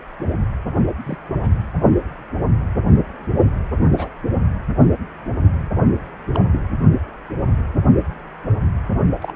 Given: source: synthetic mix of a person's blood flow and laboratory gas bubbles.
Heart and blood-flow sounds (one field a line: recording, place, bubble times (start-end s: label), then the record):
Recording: Doppler ultrasound of blood flow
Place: precordium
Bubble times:
1.06-1.18 s: bubbles
1.41-1.50 s: bubbles
3.97-4.08 s: bubbles
6.33-6.38 s: bubbles
6.51-6.60 s: bubbles
9.21-9.33 s: bubbles
From the record:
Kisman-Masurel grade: 122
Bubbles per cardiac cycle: 1 to 2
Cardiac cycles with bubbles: 10 to 50%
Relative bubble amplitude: moderate (0.250 to 0.450)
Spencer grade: 2 (many but less than half of the cardiac periods contain bubble signals, singularly or in groups)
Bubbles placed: only in the low amplitude regions of the cardiac cycle